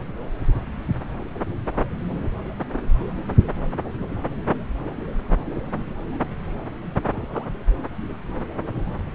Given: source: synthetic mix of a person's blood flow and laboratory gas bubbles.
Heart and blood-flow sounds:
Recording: Doppler ultrasound of blood flow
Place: subclavian vein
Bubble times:
7.07-7.46 s: bubbles
From the record:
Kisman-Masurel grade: 111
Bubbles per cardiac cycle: 1 to 2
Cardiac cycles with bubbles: 1 to 10%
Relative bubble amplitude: barely perceptible (0.100 to 0.250)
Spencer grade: 1 (occasional bubble signal discernible with the cardiac motion signal, with majority of cardiac periods free of bubbles)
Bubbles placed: anywhere in the cardiac cycle

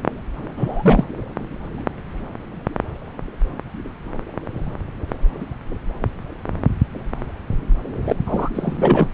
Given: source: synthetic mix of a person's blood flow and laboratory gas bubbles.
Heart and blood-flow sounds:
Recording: Doppler ultrasound of blood flow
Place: subclavian vein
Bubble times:
0.57-1.05 s: bubbles
8.05-8.16 s: bubbles
8.26-8.49 s: bubbles
8.54-9.08 s: bubbles
From the record:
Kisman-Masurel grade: 212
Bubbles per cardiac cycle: several, 3 to 8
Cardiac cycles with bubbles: 1 to 10%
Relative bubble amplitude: moderate (0.250 to 0.450)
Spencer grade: 1 (occasional bubble signal discernible with the cardiac motion signal, with majority of cardiac periods free of bubbles)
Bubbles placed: anywhere in the cardiac cycle

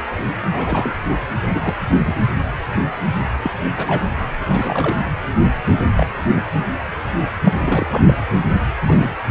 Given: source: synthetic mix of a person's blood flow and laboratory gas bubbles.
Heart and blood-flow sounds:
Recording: Doppler ultrasound of blood flow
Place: precordium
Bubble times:
0.49-0.96 s: bubbles
1.54-1.75 s: bubbles
2.04-2.16 s: bubbles
3.44-3.50 s: bubbles
3.77-4.08 s: bubbles
4.38-5.03 s: bubbles
5.62-5.83 s: bubbles
5.96-6.07 s: bubbles
6.35-6.45 s: bubbles
6.53-6.63 s: bubbles
7.45-7.53 s: bubbles
7.65-8.03 s: bubbles
8.06-8.14 s: bubbles
8.86-9.10 s: bubbles
From the record:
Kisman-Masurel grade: 232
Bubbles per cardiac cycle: several, 3 to 8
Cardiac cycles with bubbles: 50 to 99%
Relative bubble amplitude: moderate (0.250 to 0.450)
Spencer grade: 3 (all of the cardiac periods contain showers or single bubble signals, but not dominating or overriding the cardiac motion signals)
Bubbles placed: anywhere in the cardiac cycle

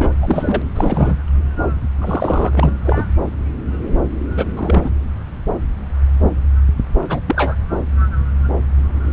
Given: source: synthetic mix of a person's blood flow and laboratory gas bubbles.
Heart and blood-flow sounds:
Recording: Doppler ultrasound of blood flow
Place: subclavian vein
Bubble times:
0.00-0.11 s: bubbles
0.21-0.62 s: bubbles
0.75-1.16 s: bubbles
2.00-2.50 s: bubbles
2.54-2.71 s: bubbles
2.84-3.04 s: bubbles
4.35-4.46 s: bubbles
4.56-4.90 s: bubbles
7.08-7.19 s: bubbles
7.26-7.54 s: bubbles
From the record:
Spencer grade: 3 (all of the cardiac periods contain showers or single bubble signals, but not dominating or overriding the cardiac motion signals)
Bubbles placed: anywhere in the cardiac cycle

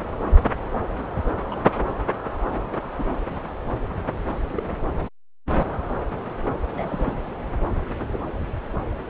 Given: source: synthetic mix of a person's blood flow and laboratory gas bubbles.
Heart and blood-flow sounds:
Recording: Doppler ultrasound of blood flow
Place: subclavian vein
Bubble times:
0.02-0.15 s: bubbles
1.50-1.60 s: bubbles
2.98-3.03 s: bubbles
3.13-3.21 s: bubbles
4.55-4.63 s: bubbles
6.74-7.13 s: bubbles
From the record:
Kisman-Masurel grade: 121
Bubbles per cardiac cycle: 1 to 2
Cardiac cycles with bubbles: 10 to 50%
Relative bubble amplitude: barely perceptible (0.100 to 0.250)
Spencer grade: 2 (many but less than half of the cardiac periods contain bubble signals, singularly or in groups)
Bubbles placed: anywhere in the cardiac cycle

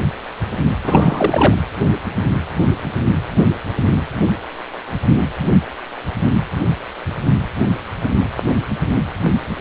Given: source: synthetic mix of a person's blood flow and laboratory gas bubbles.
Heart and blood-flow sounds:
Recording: Doppler ultrasound of blood flow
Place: precordium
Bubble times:
0.83-1.54 s: bubbles
From the record:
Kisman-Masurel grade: 213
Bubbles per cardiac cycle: several, 3 to 8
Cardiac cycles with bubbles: 1 to 10%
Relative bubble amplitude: loud (0.450 to 0.775)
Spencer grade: 1 (occasional bubble signal discernible with the cardiac motion signal, with majority of cardiac periods free of bubbles)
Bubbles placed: anywhere in the cardiac cycle

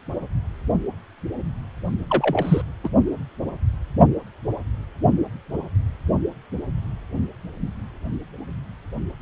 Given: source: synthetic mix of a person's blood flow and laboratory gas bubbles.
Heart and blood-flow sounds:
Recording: Doppler ultrasound of blood flow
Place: precordium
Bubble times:
2.08-2.62 s: bubbles
2.83-2.89 s: bubbles
From the record:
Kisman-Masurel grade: 213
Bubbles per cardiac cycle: several, 3 to 8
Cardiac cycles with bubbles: 1 to 10%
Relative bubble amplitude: loud (0.450 to 0.775)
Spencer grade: 1 (occasional bubble signal discernible with the cardiac motion signal, with majority of cardiac periods free of bubbles)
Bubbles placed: only in the low amplitude regions of the cardiac cycle

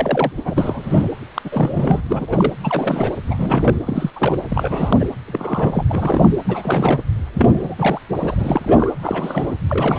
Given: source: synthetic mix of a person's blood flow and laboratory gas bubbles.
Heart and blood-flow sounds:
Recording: Doppler ultrasound of blood flow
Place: precordium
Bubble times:
0.00-0.32 s: bubbles
0.37-0.41 s: bubbles
0.45-1.08 s: bubbles
1.35-1.42 s: bubbles
1.45-2.01 s: bubbles
2.07-2.54 s: bubbles
2.64-3.17 s: bubbles
3.28-3.81 s: bubbles
3.87-4.11 s: bubbles
4.16-4.37 s: bubbles
4.49-4.96 s: bubbles
5.00-5.08 s: bubbles
5.27-5.84 s: bubbles
5.88-6.31 s: bubbles
6.45-7.01 s: bubbles
7.33-7.75 s: bubbles
7.79-7.99 s: bubbles
8.16-8.93 s: bubbles
9.00-9.54 s: bubbles
9.68-9.99 s: bubbles
From the record:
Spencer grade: 3 (all of the cardiac periods contain showers or single bubble signals, but not dominating or overriding the cardiac motion signals)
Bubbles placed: anywhere in the cardiac cycle

